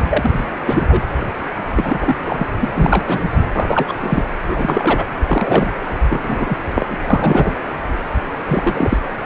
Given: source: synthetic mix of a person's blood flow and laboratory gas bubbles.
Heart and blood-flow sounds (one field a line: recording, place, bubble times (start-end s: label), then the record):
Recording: Doppler ultrasound of blood flow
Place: precordium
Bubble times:
0.08-0.46 s: bubbles
0.59-1.01 s: bubbles
1.75-2.16 s: bubbles
2.26-2.47 s: bubbles
2.60-2.69 s: bubbles
2.75-3.35 s: bubbles
3.55-3.97 s: bubbles
3.99-4.22 s: bubbles
4.48-5.04 s: bubbles
5.28-5.71 s: bubbles
6.09-6.20 s: bubbles
6.22-6.58 s: bubbles
6.75-6.98 s: bubbles
7.10-7.54 s: bubbles
8.46-8.98 s: bubbles
From the record:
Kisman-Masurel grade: 333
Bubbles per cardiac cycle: rolling drumbeat, 9 or more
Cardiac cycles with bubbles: 50 to 99%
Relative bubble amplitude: loud (0.450 to 0.775)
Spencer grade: 3 (all of the cardiac periods contain showers or single bubble signals, but not dominating or overriding the cardiac motion signals)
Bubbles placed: anywhere in the cardiac cycle